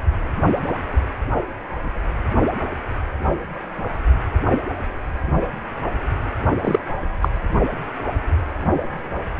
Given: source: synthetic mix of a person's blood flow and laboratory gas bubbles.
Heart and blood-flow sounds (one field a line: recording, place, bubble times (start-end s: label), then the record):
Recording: Doppler ultrasound of blood flow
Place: precordium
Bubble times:
6.62-6.79 s: bubbles
7.21-7.29 s: bubbles
From the record:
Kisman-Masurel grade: 213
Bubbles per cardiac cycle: several, 3 to 8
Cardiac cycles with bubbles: 1 to 10%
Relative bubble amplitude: loud (0.450 to 0.775)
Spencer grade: 1 (occasional bubble signal discernible with the cardiac motion signal, with majority of cardiac periods free of bubbles)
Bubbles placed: only in the low amplitude regions of the cardiac cycle